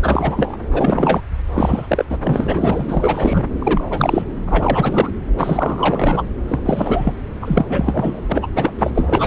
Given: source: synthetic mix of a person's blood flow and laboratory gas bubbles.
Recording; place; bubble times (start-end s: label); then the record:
Doppler ultrasound of blood flow; subclavian vein
0.02-0.57 s: bubbles
0.72-1.21 s: bubbles
1.53-2.05 s: bubbles
2.09-2.17 s: bubbles
2.22-3.46 s: bubbles
3.58-3.84 s: bubbles
3.90-4.24 s: bubbles
4.46-5.10 s: bubbles
5.38-6.22 s: bubbles
6.48-6.59 s: bubbles
6.64-7.12 s: bubbles
7.42-7.65 s: bubbles
7.69-8.21 s: bubbles
8.29-8.47 s: bubbles
8.55-8.72 s: bubbles
8.79-8.90 s: bubbles
8.94-9.27 s: bubbles
From the record:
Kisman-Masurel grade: 343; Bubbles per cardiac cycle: rolling drumbeat, 9 or more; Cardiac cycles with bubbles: 100%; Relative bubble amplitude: loud (0.450 to 0.775); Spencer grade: 3 (all of the cardiac periods contain showers or single bubble signals, but not dominating or overriding the cardiac motion signals); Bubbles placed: anywhere in the cardiac cycle